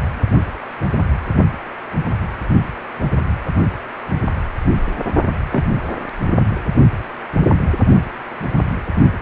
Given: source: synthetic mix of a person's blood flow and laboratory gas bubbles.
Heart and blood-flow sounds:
Doppler ultrasound of blood flow; precordium
5.51-5.64 s: bubbles
6.29-6.38 s: bubbles
From the record:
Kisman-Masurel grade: 112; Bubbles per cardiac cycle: 1 to 2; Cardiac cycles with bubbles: 1 to 10%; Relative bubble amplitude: moderate (0.250 to 0.450); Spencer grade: 1 (occasional bubble signal discernible with the cardiac motion signal, with majority of cardiac periods free of bubbles); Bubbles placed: only in the low amplitude regions of the cardiac cycle

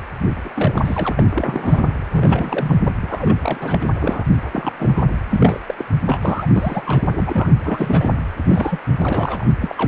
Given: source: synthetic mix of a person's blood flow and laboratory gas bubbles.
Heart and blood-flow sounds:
Doppler ultrasound of blood flow; precordium
0.44-0.49 s: bubbles
0.54-0.80 s: bubbles
0.85-1.26 s: bubbles
1.35-1.83 s: bubbles
2.10-2.92 s: bubbles
3.03-3.40 s: bubbles
3.42-3.86 s: bubbles
4.00-4.25 s: bubbles
4.51-4.72 s: bubbles
4.79-5.04 s: bubbles
5.30-5.60 s: bubbles
5.67-5.75 s: bubbles
5.78-5.85 s: bubbles
6.06-6.18 s: bubbles
6.22-6.47 s: bubbles
6.53-6.81 s: bubbles
6.85-7.02 s: bubbles
7.10-7.50 s: bubbles
7.64-8.12 s: bubbles
8.48-8.79 s: bubbles
8.90-9.45 s: bubbles
9.61-9.87 s: bubbles
From the record:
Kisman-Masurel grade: 242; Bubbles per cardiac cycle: several, 3 to 8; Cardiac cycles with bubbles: 100%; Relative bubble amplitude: moderate (0.250 to 0.450); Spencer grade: 3 (all of the cardiac periods contain showers or single bubble signals, but not dominating or overriding the cardiac motion signals); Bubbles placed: anywhere in the cardiac cycle

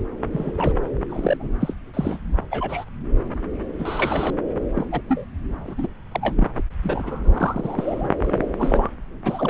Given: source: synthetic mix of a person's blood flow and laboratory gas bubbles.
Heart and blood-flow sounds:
Doppler ultrasound of blood flow; subclavian vein
0.32-0.52 s: bubbles
0.57-0.74 s: bubbles
1.09-1.37 s: bubbles
1.40-1.52 s: bubbles
1.60-1.74 s: bubbles
1.94-2.19 s: bubbles
2.51-2.85 s: bubbles
3.79-4.34 s: bubbles
4.73-4.86 s: bubbles
4.92-5.01 s: bubbles
5.08-5.25 s: bubbles
5.64-5.88 s: bubbles
6.12-6.47 s: bubbles
6.54-6.62 s: bubbles
6.83-8.09 s: bubbles
8.25-8.46 s: bubbles
8.59-8.89 s: bubbles
9.25-9.49 s: bubbles
From the record:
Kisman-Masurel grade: 242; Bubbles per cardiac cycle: several, 3 to 8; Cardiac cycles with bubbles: 100%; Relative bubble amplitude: moderate (0.250 to 0.450); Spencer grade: 3 (all of the cardiac periods contain showers or single bubble signals, but not dominating or overriding the cardiac motion signals); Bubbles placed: anywhere in the cardiac cycle

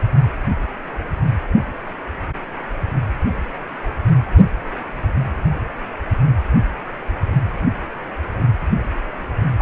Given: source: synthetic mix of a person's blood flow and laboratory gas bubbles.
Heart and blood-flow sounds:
Doppler ultrasound of blood flow; precordium
9.57-9.62 s: bubbles
From the record:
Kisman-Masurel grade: 212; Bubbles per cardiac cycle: several, 3 to 8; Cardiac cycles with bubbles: 1 to 10%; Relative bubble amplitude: moderate (0.250 to 0.450); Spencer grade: 1 (occasional bubble signal discernible with the cardiac motion signal, with majority of cardiac periods free of bubbles); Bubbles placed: only in the low amplitude regions of the cardiac cycle

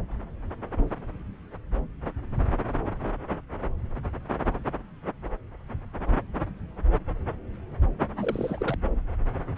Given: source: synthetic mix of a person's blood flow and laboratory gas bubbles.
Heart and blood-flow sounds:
Doppler ultrasound of blood flow; subclavian vein
8.19-8.76 s: bubbles
From the record:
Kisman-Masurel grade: 211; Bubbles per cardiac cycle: several, 3 to 8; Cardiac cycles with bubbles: 1 to 10%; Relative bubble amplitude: barely perceptible (0.100 to 0.250); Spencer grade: 1 (occasional bubble signal discernible with the cardiac motion signal, with majority of cardiac periods free of bubbles); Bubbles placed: anywhere in the cardiac cycle

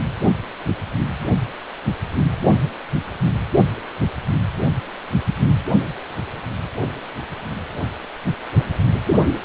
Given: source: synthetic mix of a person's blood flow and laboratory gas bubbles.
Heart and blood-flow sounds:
Doppler ultrasound of blood flow; precordium
no bubbles
From the record:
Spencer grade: 0 (complete lack of bubble signals)

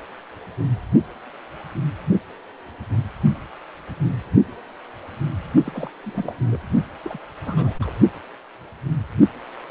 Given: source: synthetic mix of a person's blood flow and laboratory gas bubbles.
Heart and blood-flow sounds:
Doppler ultrasound of blood flow; precordium
5.65-5.91 s: bubbles
6.03-6.34 s: bubbles
6.51-6.58 s: bubbles
7.04-7.18 s: bubbles
7.45-7.75 s: bubbles
7.82-7.90 s: bubbles
From the record:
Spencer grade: 2 (many but less than half of the cardiac periods contain bubble signals, singularly or in groups); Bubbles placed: only in the low amplitude regions of the cardiac cycle

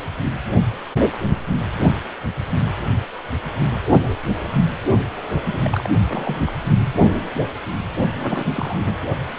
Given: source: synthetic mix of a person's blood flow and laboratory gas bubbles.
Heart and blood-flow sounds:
Doppler ultrasound of blood flow; precordium
5.54-5.58 s: bubbles
5.65-5.89 s: bubbles
6.08-6.51 s: bubbles
8.21-8.45 s: bubbles
8.54-8.81 s: bubbles
8.85-9.04 s: bubbles
From the record:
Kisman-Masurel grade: 221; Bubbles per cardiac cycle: several, 3 to 8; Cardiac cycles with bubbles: 10 to 50%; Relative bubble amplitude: barely perceptible (0.100 to 0.250); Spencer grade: 2 (many but less than half of the cardiac periods contain bubble signals, singularly or in groups); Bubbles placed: only in the low amplitude regions of the cardiac cycle

